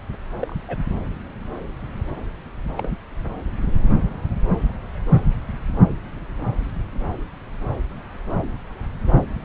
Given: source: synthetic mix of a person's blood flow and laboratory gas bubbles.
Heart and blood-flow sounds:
Doppler ultrasound of blood flow; subclavian vein
0.40-0.56 s: bubbles
0.68-0.77 s: bubbles
2.77-2.91 s: bubbles
From the record:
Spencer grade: 2 (many but less than half of the cardiac periods contain bubble signals, singularly or in groups); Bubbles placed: anywhere in the cardiac cycle

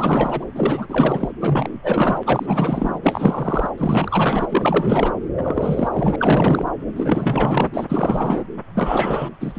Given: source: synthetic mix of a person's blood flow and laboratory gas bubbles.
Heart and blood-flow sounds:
Doppler ultrasound of blood flow; subclavian vein
0.00-0.45 s: bubbles
0.55-1.32 s: bubbles
1.40-1.69 s: bubbles
1.82-2.19 s: bubbles
2.25-2.98 s: bubbles
3.02-3.71 s: bubbles
3.77-5.12 s: bubbles
5.37-5.88 s: bubbles
5.92-6.71 s: bubbles
6.96-7.68 s: bubbles
7.74-7.85 s: bubbles
7.89-8.44 s: bubbles
8.75-9.29 s: bubbles
9.40-9.59 s: bubbles
From the record:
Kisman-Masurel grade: 444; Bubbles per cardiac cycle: continuous sound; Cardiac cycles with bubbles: 100%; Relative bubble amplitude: maximal (0.775 to 0.999); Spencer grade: 4 (maximum detectable bubble signal sounding continuously throughout systole and diastole of every cardiac period, and overriding the amplitude of the normal cardiac signals); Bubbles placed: anywhere in the cardiac cycle

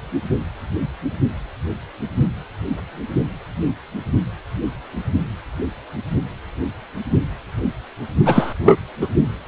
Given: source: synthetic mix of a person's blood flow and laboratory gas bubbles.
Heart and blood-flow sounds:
Doppler ultrasound of blood flow; precordium
8.25-8.54 s: bubbles
8.59-8.79 s: bubbles
9.01-9.07 s: bubbles
From the record:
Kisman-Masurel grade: 223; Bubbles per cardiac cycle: several, 3 to 8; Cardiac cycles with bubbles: 10 to 50%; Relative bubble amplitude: loud (0.450 to 0.775); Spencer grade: 2 (many but less than half of the cardiac periods contain bubble signals, singularly or in groups); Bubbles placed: only in the low amplitude regions of the cardiac cycle

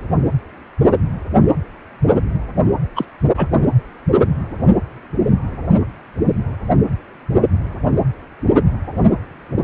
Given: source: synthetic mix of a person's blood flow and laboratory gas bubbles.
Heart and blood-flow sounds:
Doppler ultrasound of blood flow; precordium
2.95-3.05 s: bubbles
3.37-3.48 s: bubbles
From the record:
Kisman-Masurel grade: 213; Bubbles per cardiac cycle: several, 3 to 8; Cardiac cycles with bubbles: 1 to 10%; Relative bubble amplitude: loud (0.450 to 0.775); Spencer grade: 1 (occasional bubble signal discernible with the cardiac motion signal, with majority of cardiac periods free of bubbles); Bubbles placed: anywhere in the cardiac cycle

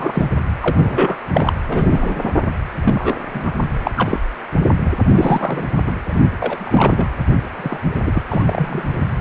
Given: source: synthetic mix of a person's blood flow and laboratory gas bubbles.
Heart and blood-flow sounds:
Doppler ultrasound of blood flow; precordium
0.00-0.26 s: bubbles
0.61-1.17 s: bubbles
1.32-1.53 s: bubbles
1.67-2.33 s: bubbles
2.83-3.16 s: bubbles
3.33-3.51 s: bubbles
3.83-3.91 s: bubbles
3.96-4.21 s: bubbles
4.86-4.95 s: bubbles
5.15-5.62 s: bubbles
5.87-5.92 s: bubbles
6.08-6.20 s: bubbles
6.40-7.08 s: bubbles
7.57-7.80 s: bubbles
7.93-8.22 s: bubbles
8.31-8.84 s: bubbles
8.93-9.01 s: bubbles
From the record:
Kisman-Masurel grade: 232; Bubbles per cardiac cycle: several, 3 to 8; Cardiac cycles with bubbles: 50 to 99%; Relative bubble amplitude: moderate (0.250 to 0.450); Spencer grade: 3 (all of the cardiac periods contain showers or single bubble signals, but not dominating or overriding the cardiac motion signals); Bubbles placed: anywhere in the cardiac cycle

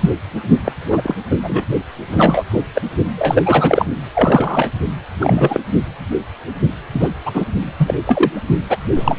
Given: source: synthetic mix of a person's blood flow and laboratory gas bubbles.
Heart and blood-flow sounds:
Doppler ultrasound of blood flow; precordium
0.00-0.10 s: bubbles
0.65-0.72 s: bubbles
0.89-1.16 s: bubbles
1.31-1.36 s: bubbles
1.43-1.65 s: bubbles
2.10-2.45 s: bubbles
2.53-2.62 s: bubbles
2.74-2.81 s: bubbles
3.15-3.43 s: bubbles
3.45-3.85 s: bubbles
4.15-4.71 s: bubbles
5.20-5.61 s: bubbles
6.94-7.08 s: bubbles
7.25-7.45 s: bubbles
7.78-7.94 s: bubbles
8.06-8.45 s: bubbles
8.70-8.78 s: bubbles
8.96-9.19 s: bubbles
From the record:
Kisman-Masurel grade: 233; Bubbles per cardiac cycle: several, 3 to 8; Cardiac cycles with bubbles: 50 to 99%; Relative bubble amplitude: loud (0.450 to 0.775); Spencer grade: 3 (all of the cardiac periods contain showers or single bubble signals, but not dominating or overriding the cardiac motion signals); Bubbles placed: only in the low amplitude regions of the cardiac cycle

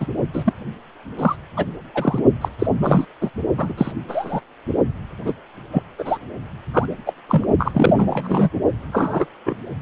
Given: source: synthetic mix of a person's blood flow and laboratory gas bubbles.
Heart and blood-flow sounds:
Doppler ultrasound of blood flow; precordium
0.00-0.07 s: bubbles
0.33-0.53 s: bubbles
1.19-1.35 s: bubbles
1.56-1.66 s: bubbles
1.94-2.23 s: bubbles
2.41-2.49 s: bubbles
2.58-2.67 s: bubbles
2.82-3.05 s: bubbles
3.21-3.30 s: bubbles
3.57-3.73 s: bubbles
3.77-3.92 s: bubbles
4.08-4.40 s: bubbles
5.24-5.33 s: bubbles
5.71-5.83 s: bubbles
5.98-6.18 s: bubbles
6.73-6.88 s: bubbles
7.06-7.13 s: bubbles
7.28-7.46 s: bubbles
7.58-8.49 s: bubbles
8.91-9.25 s: bubbles
9.46-9.58 s: bubbles
From the record:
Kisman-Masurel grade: 243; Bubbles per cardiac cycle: several, 3 to 8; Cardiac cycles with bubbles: 100%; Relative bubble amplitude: loud (0.450 to 0.775); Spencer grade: 3 (all of the cardiac periods contain showers or single bubble signals, but not dominating or overriding the cardiac motion signals); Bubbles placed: only in the low amplitude regions of the cardiac cycle

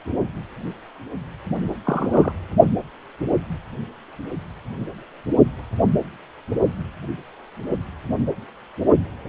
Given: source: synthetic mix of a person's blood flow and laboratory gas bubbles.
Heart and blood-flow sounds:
Doppler ultrasound of blood flow; precordium
1.85-2.32 s: bubbles
From the record:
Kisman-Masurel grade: 222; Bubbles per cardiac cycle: several, 3 to 8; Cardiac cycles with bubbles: 10 to 50%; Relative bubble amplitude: moderate (0.250 to 0.450); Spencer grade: 2 (many but less than half of the cardiac periods contain bubble signals, singularly or in groups); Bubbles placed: only in the low amplitude regions of the cardiac cycle

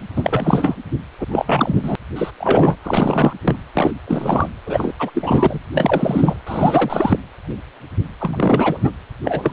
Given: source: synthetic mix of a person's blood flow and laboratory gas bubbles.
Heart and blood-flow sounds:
Doppler ultrasound of blood flow; precordium
0.16-0.76 s: bubbles
1.19-1.27 s: bubbles
1.31-1.96 s: bubbles
2.15-2.31 s: bubbles
2.40-2.76 s: bubbles
2.82-3.33 s: bubbles
3.41-3.56 s: bubbles
3.75-3.91 s: bubbles
4.07-4.48 s: bubbles
4.66-4.93 s: bubbles
4.98-5.10 s: bubbles
5.13-5.58 s: bubbles
5.72-6.37 s: bubbles
6.46-7.18 s: bubbles
8.20-8.92 s: bubbles
9.25-9.53 s: bubbles
From the record:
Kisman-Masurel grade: 333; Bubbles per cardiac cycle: rolling drumbeat, 9 or more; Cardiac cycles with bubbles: 50 to 99%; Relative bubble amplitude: loud (0.450 to 0.775); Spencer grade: 3 (all of the cardiac periods contain showers or single bubble signals, but not dominating or overriding the cardiac motion signals); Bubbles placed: anywhere in the cardiac cycle

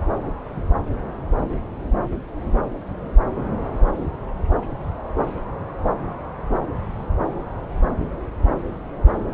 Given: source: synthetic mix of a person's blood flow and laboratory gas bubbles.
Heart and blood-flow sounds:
Doppler ultrasound of blood flow; subclavian vein
no bubbles
From the record:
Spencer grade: 0 (complete lack of bubble signals)

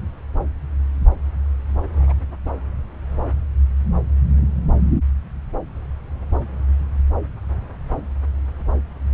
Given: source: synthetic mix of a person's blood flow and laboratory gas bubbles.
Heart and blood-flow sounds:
Doppler ultrasound of blood flow; subclavian vein
1.99-2.13 s: bubbles
From the record:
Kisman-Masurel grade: 111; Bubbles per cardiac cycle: 1 to 2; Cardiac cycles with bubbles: 1 to 10%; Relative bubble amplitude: barely perceptible (0.100 to 0.250); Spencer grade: 1 (occasional bubble signal discernible with the cardiac motion signal, with majority of cardiac periods free of bubbles); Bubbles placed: anywhere in the cardiac cycle

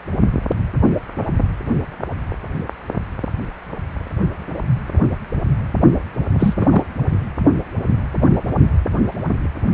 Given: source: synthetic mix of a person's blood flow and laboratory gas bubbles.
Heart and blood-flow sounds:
Doppler ultrasound of blood flow; precordium
6.39-6.54 s: bubbles
6.57-6.66 s: bubbles
6.70-6.83 s: bubbles
From the record:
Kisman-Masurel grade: 223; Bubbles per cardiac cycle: several, 3 to 8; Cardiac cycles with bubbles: 10 to 50%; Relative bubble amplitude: loud (0.450 to 0.775); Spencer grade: 2 (many but less than half of the cardiac periods contain bubble signals, singularly or in groups); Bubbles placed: only in the low amplitude regions of the cardiac cycle

